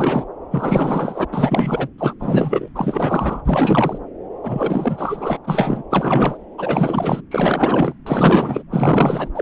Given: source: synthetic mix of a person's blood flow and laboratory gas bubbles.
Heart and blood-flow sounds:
Doppler ultrasound of blood flow; subclavian vein
0.00-0.25 s: bubbles
0.51-1.25 s: bubbles
1.32-1.88 s: bubbles
1.98-2.13 s: bubbles
2.20-2.68 s: bubbles
2.75-3.42 s: bubbles
3.45-3.98 s: bubbles
4.43-5.39 s: bubbles
5.44-5.83 s: bubbles
5.90-6.38 s: bubbles
6.58-7.21 s: bubbles
7.31-7.93 s: bubbles
8.06-8.63 s: bubbles
8.70-9.29 s: bubbles
9.34-9.42 s: bubbles
From the record:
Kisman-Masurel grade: 444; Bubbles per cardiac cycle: continuous sound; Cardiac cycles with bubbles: 100%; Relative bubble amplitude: maximal (0.775 to 0.999); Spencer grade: 4 (maximum detectable bubble signal sounding continuously throughout systole and diastole of every cardiac period, and overriding the amplitude of the normal cardiac signals); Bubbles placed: anywhere in the cardiac cycle

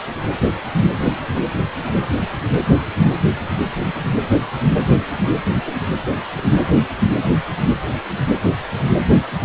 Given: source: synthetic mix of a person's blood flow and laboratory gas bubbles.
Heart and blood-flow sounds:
Doppler ultrasound of blood flow; precordium
no bubbles
From the record:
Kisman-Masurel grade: 000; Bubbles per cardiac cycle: 0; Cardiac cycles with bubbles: 0%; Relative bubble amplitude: no bubbles discernible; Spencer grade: 0 (complete lack of bubble signals)

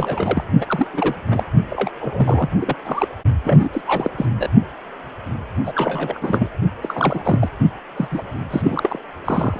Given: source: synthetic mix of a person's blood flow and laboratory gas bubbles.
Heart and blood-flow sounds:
Doppler ultrasound of blood flow; precordium
0.00-0.44 s: bubbles
0.60-0.87 s: bubbles
0.93-1.15 s: bubbles
1.27-1.44 s: bubbles
1.70-1.90 s: bubbles
2.01-2.48 s: bubbles
2.61-2.75 s: bubbles
2.83-3.07 s: bubbles
3.44-3.69 s: bubbles
3.72-3.81 s: bubbles
3.87-4.11 s: bubbles
4.18-4.25 s: bubbles
4.39-4.48 s: bubbles
5.65-6.48 s: bubbles
6.82-7.48 s: bubbles
7.96-8.07 s: bubbles
8.11-8.23 s: bubbles
8.50-8.99 s: bubbles
9.24-9.60 s: bubbles
From the record:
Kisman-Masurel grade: 332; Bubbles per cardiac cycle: rolling drumbeat, 9 or more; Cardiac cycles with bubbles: 50 to 99%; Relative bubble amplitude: moderate (0.250 to 0.450); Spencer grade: 3 (all of the cardiac periods contain showers or single bubble signals, but not dominating or overriding the cardiac motion signals); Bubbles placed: only in the low amplitude regions of the cardiac cycle

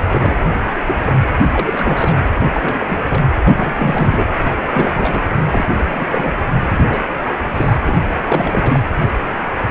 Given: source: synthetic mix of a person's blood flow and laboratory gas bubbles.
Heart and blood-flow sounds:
Doppler ultrasound of blood flow; precordium
0.00-0.04 s: bubbles
0.10-0.38 s: bubbles
0.87-0.95 s: bubbles
1.05-1.13 s: bubbles
1.52-2.16 s: bubbles
2.35-3.03 s: bubbles
3.08-3.23 s: bubbles
3.44-3.74 s: bubbles
3.77-4.24 s: bubbles
4.43-4.54 s: bubbles
4.71-5.21 s: bubbles
5.47-5.68 s: bubbles
5.86-6.07 s: bubbles
6.10-6.32 s: bubbles
6.76-7.00 s: bubbles
7.55-7.76 s: bubbles
7.86-7.97 s: bubbles
8.26-8.83 s: bubbles
From the record:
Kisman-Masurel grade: 332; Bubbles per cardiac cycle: rolling drumbeat, 9 or more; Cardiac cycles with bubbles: 50 to 99%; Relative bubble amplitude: moderate (0.250 to 0.450); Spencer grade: 3 (all of the cardiac periods contain showers or single bubble signals, but not dominating or overriding the cardiac motion signals); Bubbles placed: anywhere in the cardiac cycle

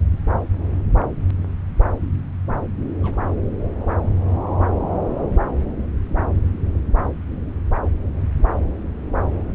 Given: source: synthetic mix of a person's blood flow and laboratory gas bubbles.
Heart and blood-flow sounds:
Doppler ultrasound of blood flow; subclavian vein
3.00-3.19 s: bubbles
3.27-3.31 s: bubbles
From the record:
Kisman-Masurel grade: 211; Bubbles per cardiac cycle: several, 3 to 8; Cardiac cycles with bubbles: 1 to 10%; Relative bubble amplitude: barely perceptible (0.100 to 0.250); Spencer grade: 1 (occasional bubble signal discernible with the cardiac motion signal, with majority of cardiac periods free of bubbles); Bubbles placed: anywhere in the cardiac cycle

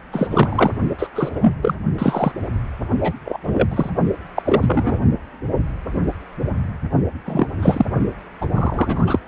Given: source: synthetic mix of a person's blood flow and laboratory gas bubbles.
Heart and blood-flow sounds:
Doppler ultrasound of blood flow; precordium
0.12-0.71 s: bubbles
0.98-1.06 s: bubbles
1.15-1.55 s: bubbles
1.62-1.75 s: bubbles
1.98-2.32 s: bubbles
3.00-3.13 s: bubbles
3.25-3.40 s: bubbles
3.44-3.90 s: bubbles
4.36-5.00 s: bubbles
7.26-7.47 s: bubbles
7.62-7.85 s: bubbles
8.41-8.46 s: bubbles
8.54-9.20 s: bubbles
From the record:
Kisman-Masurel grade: 233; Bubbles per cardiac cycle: several, 3 to 8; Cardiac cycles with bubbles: 50 to 99%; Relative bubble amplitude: loud (0.450 to 0.775); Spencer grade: 3 (all of the cardiac periods contain showers or single bubble signals, but not dominating or overriding the cardiac motion signals); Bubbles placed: only in the low amplitude regions of the cardiac cycle

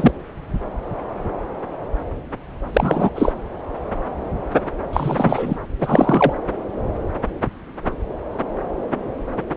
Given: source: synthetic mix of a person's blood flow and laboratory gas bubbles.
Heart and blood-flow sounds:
Doppler ultrasound of blood flow; subclavian vein
0.00-0.11 s: bubbles
2.73-3.10 s: bubbles
3.15-3.32 s: bubbles
4.93-5.57 s: bubbles
5.81-6.33 s: bubbles
From the record:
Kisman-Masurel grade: 223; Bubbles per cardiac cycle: several, 3 to 8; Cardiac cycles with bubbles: 10 to 50%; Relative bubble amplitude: loud (0.450 to 0.775); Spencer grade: 2 (many but less than half of the cardiac periods contain bubble signals, singularly or in groups); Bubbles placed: anywhere in the cardiac cycle

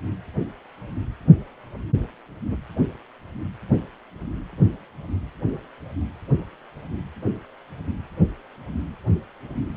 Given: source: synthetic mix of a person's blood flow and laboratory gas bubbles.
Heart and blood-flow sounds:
Doppler ultrasound of blood flow; precordium
2.47-2.57 s: bubbles
From the record:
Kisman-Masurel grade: 111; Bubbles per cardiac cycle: 1 to 2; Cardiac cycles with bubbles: 1 to 10%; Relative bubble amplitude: barely perceptible (0.100 to 0.250); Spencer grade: 1 (occasional bubble signal discernible with the cardiac motion signal, with majority of cardiac periods free of bubbles); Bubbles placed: anywhere in the cardiac cycle

